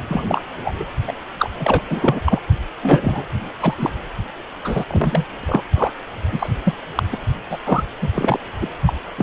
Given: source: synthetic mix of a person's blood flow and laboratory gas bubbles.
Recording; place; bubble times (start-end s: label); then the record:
Doppler ultrasound of blood flow; precordium
0.08-0.42 s: bubbles
0.64-0.85 s: bubbles
1.07-1.12 s: bubbles
1.38-1.50 s: bubbles
1.59-1.83 s: bubbles
1.90-2.20 s: bubbles
2.25-2.41 s: bubbles
2.83-3.26 s: bubbles
3.60-3.75 s: bubbles
3.78-3.90 s: bubbles
4.64-4.85 s: bubbles
4.88-5.25 s: bubbles
5.43-5.65 s: bubbles
5.76-5.91 s: bubbles
6.32-6.50 s: bubbles
6.63-6.74 s: bubbles
6.95-7.03 s: bubbles
7.11-7.20 s: bubbles
7.50-7.58 s: bubbles
7.65-7.83 s: bubbles
8.01-8.08 s: bubbles
8.14-8.39 s: bubbles
8.61-8.68 s: bubbles
8.86-8.93 s: bubbles
9.17-9.23 s: bubbles
From the record:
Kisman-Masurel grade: 243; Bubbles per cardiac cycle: several, 3 to 8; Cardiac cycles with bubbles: 100%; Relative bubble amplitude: loud (0.450 to 0.775); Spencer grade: 3 (all of the cardiac periods contain showers or single bubble signals, but not dominating or overriding the cardiac motion signals); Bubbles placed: anywhere in the cardiac cycle